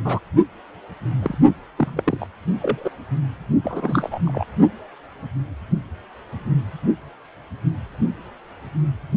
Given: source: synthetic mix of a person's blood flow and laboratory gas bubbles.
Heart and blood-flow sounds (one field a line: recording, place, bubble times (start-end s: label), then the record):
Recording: Doppler ultrasound of blood flow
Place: precordium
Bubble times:
0.05-0.20 s: bubbles
1.22-1.38 s: bubbles
1.77-2.27 s: bubbles
2.59-2.90 s: bubbles
3.63-4.20 s: bubbles
4.26-4.45 s: bubbles
From the record:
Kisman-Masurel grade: 222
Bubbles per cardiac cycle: several, 3 to 8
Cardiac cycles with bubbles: 10 to 50%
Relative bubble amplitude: moderate (0.250 to 0.450)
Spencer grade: 2 (many but less than half of the cardiac periods contain bubble signals, singularly or in groups)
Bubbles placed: only in the low amplitude regions of the cardiac cycle